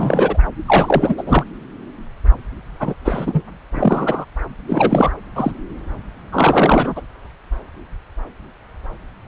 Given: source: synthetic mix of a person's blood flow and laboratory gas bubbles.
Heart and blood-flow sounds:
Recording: Doppler ultrasound of blood flow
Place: subclavian vein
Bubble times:
0.00-0.37 s: bubbles
0.65-1.23 s: bubbles
1.26-1.44 s: bubbles
2.80-2.94 s: bubbles
3.04-3.41 s: bubbles
3.75-4.25 s: bubbles
4.67-5.12 s: bubbles
5.36-5.52 s: bubbles
6.32-7.01 s: bubbles
From the record:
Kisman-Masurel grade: 333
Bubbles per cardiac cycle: rolling drumbeat, 9 or more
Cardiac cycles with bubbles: 50 to 99%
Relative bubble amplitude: loud (0.450 to 0.775)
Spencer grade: 3 (all of the cardiac periods contain showers or single bubble signals, but not dominating or overriding the cardiac motion signals)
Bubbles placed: anywhere in the cardiac cycle

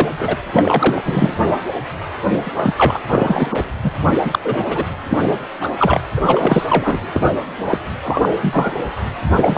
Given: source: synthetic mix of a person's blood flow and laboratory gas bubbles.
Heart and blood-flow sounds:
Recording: Doppler ultrasound of blood flow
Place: precordium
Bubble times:
0.00-0.09 s: bubbles
0.18-0.36 s: bubbles
0.51-1.01 s: bubbles
1.05-1.32 s: bubbles
2.41-2.99 s: bubbles
3.07-3.59 s: bubbles
3.83-3.91 s: bubbles
4.24-4.39 s: bubbles
4.43-4.64 s: bubbles
4.68-4.85 s: bubbles
5.09-5.39 s: bubbles
5.60-5.70 s: bubbles
5.79-6.00 s: bubbles
6.17-6.21 s: bubbles
6.25-6.66 s: bubbles
6.68-7.00 s: bubbles
7.13-7.29 s: bubbles
7.64-7.79 s: bubbles
8.04-8.29 s: bubbles
8.41-8.76 s: bubbles
9.36-9.58 s: bubbles
From the record:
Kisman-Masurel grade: 243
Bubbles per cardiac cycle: several, 3 to 8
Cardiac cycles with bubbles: 100%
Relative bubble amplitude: loud (0.450 to 0.775)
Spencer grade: 3 (all of the cardiac periods contain showers or single bubble signals, but not dominating or overriding the cardiac motion signals)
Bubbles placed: anywhere in the cardiac cycle

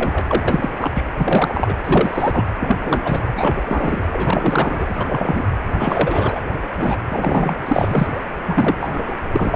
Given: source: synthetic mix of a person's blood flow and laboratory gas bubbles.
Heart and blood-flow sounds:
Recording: Doppler ultrasound of blood flow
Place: precordium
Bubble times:
0.00-0.25 s: bubbles
0.28-0.69 s: bubbles
0.78-0.91 s: bubbles
0.94-1.04 s: bubbles
1.17-1.75 s: bubbles
1.84-2.45 s: bubbles
2.59-2.76 s: bubbles
2.85-3.20 s: bubbles
3.36-3.63 s: bubbles
3.67-4.03 s: bubbles
4.12-5.48 s: bubbles
5.78-6.40 s: bubbles
6.73-6.98 s: bubbles
7.09-7.55 s: bubbles
7.66-8.23 s: bubbles
8.46-9.13 s: bubbles
9.32-9.56 s: bubbles
From the record:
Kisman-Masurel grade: 342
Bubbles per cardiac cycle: rolling drumbeat, 9 or more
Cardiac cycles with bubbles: 100%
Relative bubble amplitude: moderate (0.250 to 0.450)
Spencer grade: 3 (all of the cardiac periods contain showers or single bubble signals, but not dominating or overriding the cardiac motion signals)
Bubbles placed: anywhere in the cardiac cycle

